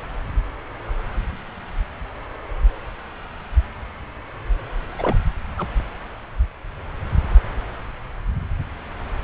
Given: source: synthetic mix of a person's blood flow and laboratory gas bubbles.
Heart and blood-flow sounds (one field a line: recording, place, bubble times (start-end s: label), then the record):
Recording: Doppler ultrasound of blood flow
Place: subclavian vein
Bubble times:
4.99-5.17 s: bubbles
5.58-5.68 s: bubbles
From the record:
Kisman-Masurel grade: 212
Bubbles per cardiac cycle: several, 3 to 8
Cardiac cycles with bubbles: 1 to 10%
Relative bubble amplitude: moderate (0.250 to 0.450)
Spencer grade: 1 (occasional bubble signal discernible with the cardiac motion signal, with majority of cardiac periods free of bubbles)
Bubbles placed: anywhere in the cardiac cycle